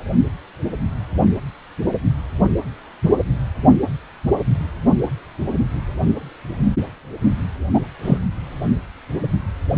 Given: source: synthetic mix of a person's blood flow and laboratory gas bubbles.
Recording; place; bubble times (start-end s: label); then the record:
Doppler ultrasound of blood flow; precordium
7.74-7.80 s: bubbles
8.03-8.18 s: bubbles
From the record:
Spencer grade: 1 (occasional bubble signal discernible with the cardiac motion signal, with majority of cardiac periods free of bubbles); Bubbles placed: only in the low amplitude regions of the cardiac cycle